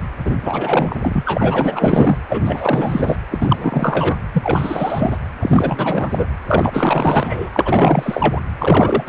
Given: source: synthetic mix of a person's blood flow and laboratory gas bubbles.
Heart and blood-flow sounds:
Doppler ultrasound of blood flow; precordium
0.25-0.36 s: bubbles
0.42-2.17 s: bubbles
2.28-3.19 s: bubbles
3.31-4.18 s: bubbles
4.33-5.18 s: bubbles
5.40-6.28 s: bubbles
6.47-7.50 s: bubbles
7.54-8.40 s: bubbles
8.59-9.09 s: bubbles
From the record:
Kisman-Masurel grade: 444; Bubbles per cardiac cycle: continuous sound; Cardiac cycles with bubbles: 100%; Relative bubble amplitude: maximal (0.775 to 0.999); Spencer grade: 4 (maximum detectable bubble signal sounding continuously throughout systole and diastole of every cardiac period, and overriding the amplitude of the normal cardiac signals); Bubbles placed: anywhere in the cardiac cycle

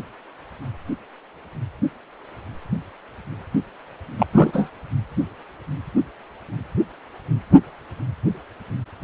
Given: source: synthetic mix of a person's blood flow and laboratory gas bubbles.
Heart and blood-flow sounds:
Doppler ultrasound of blood flow; precordium
4.18-4.26 s: bubbles
4.32-4.70 s: bubbles
From the record:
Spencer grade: 1 (occasional bubble signal discernible with the cardiac motion signal, with majority of cardiac periods free of bubbles); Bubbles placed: anywhere in the cardiac cycle

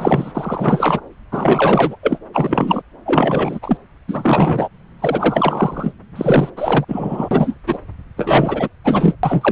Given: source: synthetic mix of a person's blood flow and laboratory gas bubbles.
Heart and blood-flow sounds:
Doppler ultrasound of blood flow; subclavian vein
0.00-0.31 s: bubbles
0.34-1.00 s: bubbles
1.31-1.96 s: bubbles
2.02-2.19 s: bubbles
2.33-2.82 s: bubbles
3.06-3.59 s: bubbles
3.62-3.77 s: bubbles
4.07-4.68 s: bubbles
4.98-5.94 s: bubbles
6.15-6.50 s: bubbles
6.56-6.85 s: bubbles
6.88-7.55 s: bubbles
7.67-7.78 s: bubbles
8.17-8.69 s: bubbles
8.84-9.17 s: bubbles
9.23-9.52 s: bubbles
From the record:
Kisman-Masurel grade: 343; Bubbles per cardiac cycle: rolling drumbeat, 9 or more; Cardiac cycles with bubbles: 100%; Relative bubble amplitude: loud (0.450 to 0.775); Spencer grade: 3 (all of the cardiac periods contain showers or single bubble signals, but not dominating or overriding the cardiac motion signals); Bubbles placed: anywhere in the cardiac cycle

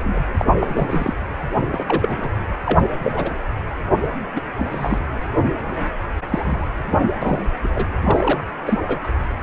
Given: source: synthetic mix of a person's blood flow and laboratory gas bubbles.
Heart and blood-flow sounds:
Doppler ultrasound of blood flow; precordium
0.00-0.19 s: bubbles
0.38-1.13 s: bubbles
1.72-2.28 s: bubbles
2.65-2.78 s: bubbles
2.98-3.30 s: bubbles
4.36-4.41 s: bubbles
4.57-4.99 s: bubbles
6.29-6.68 s: bubbles
6.91-7.00 s: bubbles
7.22-7.48 s: bubbles
7.64-7.69 s: bubbles
7.75-7.86 s: bubbles
8.03-8.41 s: bubbles
8.66-8.79 s: bubbles
8.87-8.99 s: bubbles
9.02-9.08 s: bubbles
From the record:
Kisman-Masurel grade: 242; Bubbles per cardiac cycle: several, 3 to 8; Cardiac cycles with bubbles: 100%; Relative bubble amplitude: moderate (0.250 to 0.450); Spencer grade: 3 (all of the cardiac periods contain showers or single bubble signals, but not dominating or overriding the cardiac motion signals); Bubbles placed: anywhere in the cardiac cycle

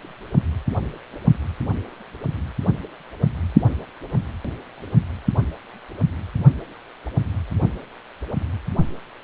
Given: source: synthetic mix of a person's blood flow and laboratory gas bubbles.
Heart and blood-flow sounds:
Doppler ultrasound of blood flow; precordium
no bubbles
From the record:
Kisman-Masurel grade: 000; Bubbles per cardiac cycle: 0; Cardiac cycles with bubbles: 0%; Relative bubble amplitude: no bubbles discernible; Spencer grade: 0 (complete lack of bubble signals)

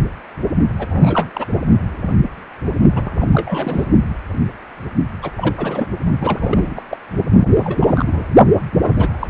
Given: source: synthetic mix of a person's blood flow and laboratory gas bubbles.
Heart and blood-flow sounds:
Doppler ultrasound of blood flow; precordium
0.78-1.30 s: bubbles
1.34-1.46 s: bubbles
2.94-3.11 s: bubbles
3.19-3.28 s: bubbles
3.32-3.84 s: bubbles
5.22-5.31 s: bubbles
5.36-5.55 s: bubbles
5.58-5.86 s: bubbles
6.20-6.83 s: bubbles
6.91-6.97 s: bubbles
7.33-7.49 s: bubbles
7.53-8.25 s: bubbles
8.67-9.09 s: bubbles
9.20-9.27 s: bubbles
From the record:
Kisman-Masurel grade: 332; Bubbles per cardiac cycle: rolling drumbeat, 9 or more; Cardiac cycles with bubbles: 50 to 99%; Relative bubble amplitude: moderate (0.250 to 0.450); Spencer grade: 3 (all of the cardiac periods contain showers or single bubble signals, but not dominating or overriding the cardiac motion signals); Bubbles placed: only in the low amplitude regions of the cardiac cycle

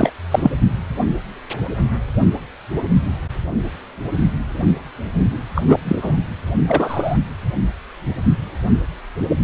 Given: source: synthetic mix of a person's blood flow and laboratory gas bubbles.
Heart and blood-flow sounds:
Doppler ultrasound of blood flow; precordium
0.00-0.12 s: bubbles
0.31-0.51 s: bubbles
5.55-5.77 s: bubbles
5.84-6.17 s: bubbles
6.67-7.17 s: bubbles
From the record:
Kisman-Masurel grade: 223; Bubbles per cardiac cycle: several, 3 to 8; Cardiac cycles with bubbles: 10 to 50%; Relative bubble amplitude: loud (0.450 to 0.775); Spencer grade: 2 (many but less than half of the cardiac periods contain bubble signals, singularly or in groups); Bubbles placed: anywhere in the cardiac cycle

